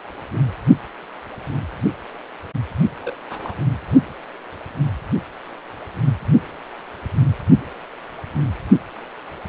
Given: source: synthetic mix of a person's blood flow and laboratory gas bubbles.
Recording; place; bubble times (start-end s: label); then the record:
Doppler ultrasound of blood flow; precordium
3.02-3.16 s: bubbles
3.29-3.54 s: bubbles
From the record:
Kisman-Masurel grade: 211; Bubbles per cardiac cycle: several, 3 to 8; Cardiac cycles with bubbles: 1 to 10%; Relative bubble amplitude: barely perceptible (0.100 to 0.250); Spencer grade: 1 (occasional bubble signal discernible with the cardiac motion signal, with majority of cardiac periods free of bubbles); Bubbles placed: only in the low amplitude regions of the cardiac cycle